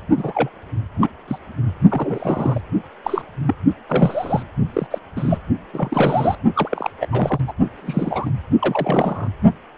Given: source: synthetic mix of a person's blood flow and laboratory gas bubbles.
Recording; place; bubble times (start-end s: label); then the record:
Doppler ultrasound of blood flow; precordium
0.17-0.49 s: bubbles
0.98-1.09 s: bubbles
1.27-1.38 s: bubbles
1.89-2.61 s: bubbles
3.04-3.22 s: bubbles
3.46-3.54 s: bubbles
3.88-4.43 s: bubbles
4.73-4.87 s: bubbles
4.91-4.99 s: bubbles
5.16-5.38 s: bubbles
5.74-6.37 s: bubbles
6.55-6.91 s: bubbles
7.01-7.06 s: bubbles
7.12-7.40 s: bubbles
7.48-7.53 s: bubbles
7.77-8.30 s: bubbles
8.59-9.28 s: bubbles
From the record:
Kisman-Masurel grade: 242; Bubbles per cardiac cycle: several, 3 to 8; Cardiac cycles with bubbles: 100%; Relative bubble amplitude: moderate (0.250 to 0.450); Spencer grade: 3 (all of the cardiac periods contain showers or single bubble signals, but not dominating or overriding the cardiac motion signals); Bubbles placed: only in the low amplitude regions of the cardiac cycle